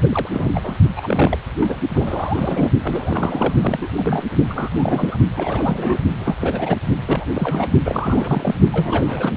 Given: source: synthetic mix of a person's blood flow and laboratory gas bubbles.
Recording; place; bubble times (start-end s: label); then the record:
Doppler ultrasound of blood flow; precordium
0.02-0.29 s: bubbles
0.33-0.77 s: bubbles
0.96-1.38 s: bubbles
1.60-1.80 s: bubbles
1.94-2.71 s: bubbles
2.83-3.54 s: bubbles
3.61-3.89 s: bubbles
3.95-4.25 s: bubbles
4.46-5.17 s: bubbles
5.37-5.98 s: bubbles
6.19-6.35 s: bubbles
6.41-6.77 s: bubbles
7.06-7.25 s: bubbles
7.33-7.68 s: bubbles
7.85-8.55 s: bubbles
8.72-9.32 s: bubbles
From the record:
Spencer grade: 3 (all of the cardiac periods contain showers or single bubble signals, but not dominating or overriding the cardiac motion signals); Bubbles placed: only in the low amplitude regions of the cardiac cycle